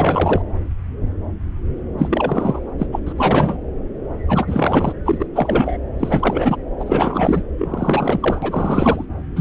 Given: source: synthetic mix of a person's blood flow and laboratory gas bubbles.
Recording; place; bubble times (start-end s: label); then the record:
Doppler ultrasound of blood flow; subclavian vein
0.00-0.42 s: bubbles
1.98-2.60 s: bubbles
2.79-2.87 s: bubbles
2.92-3.00 s: bubbles
3.06-3.12 s: bubbles
3.17-3.58 s: bubbles
4.28-4.93 s: bubbles
5.05-5.27 s: bubbles
5.34-5.78 s: bubbles
6.00-6.57 s: bubbles
6.79-7.42 s: bubbles
7.58-8.39 s: bubbles
8.42-9.04 s: bubbles
9.35-9.41 s: bubbles
From the record:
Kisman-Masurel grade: 333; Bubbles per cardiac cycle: rolling drumbeat, 9 or more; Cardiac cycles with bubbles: 50 to 99%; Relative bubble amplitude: loud (0.450 to 0.775); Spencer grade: 3 (all of the cardiac periods contain showers or single bubble signals, but not dominating or overriding the cardiac motion signals); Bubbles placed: anywhere in the cardiac cycle